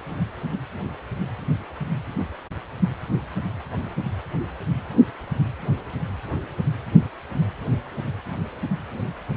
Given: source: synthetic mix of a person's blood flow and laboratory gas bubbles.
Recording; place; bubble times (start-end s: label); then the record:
Doppler ultrasound of blood flow; precordium
no bubbles
From the record:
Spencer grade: 0 (complete lack of bubble signals)